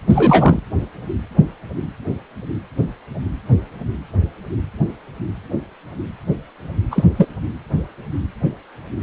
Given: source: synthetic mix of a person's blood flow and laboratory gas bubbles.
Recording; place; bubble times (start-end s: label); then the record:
Doppler ultrasound of blood flow; precordium
0.10-0.59 s: bubbles
6.91-7.04 s: bubbles
7.17-7.26 s: bubbles
From the record:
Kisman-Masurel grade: 223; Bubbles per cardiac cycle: several, 3 to 8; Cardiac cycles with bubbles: 10 to 50%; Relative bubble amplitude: loud (0.450 to 0.775); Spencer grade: 2 (many but less than half of the cardiac periods contain bubble signals, singularly or in groups); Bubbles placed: anywhere in the cardiac cycle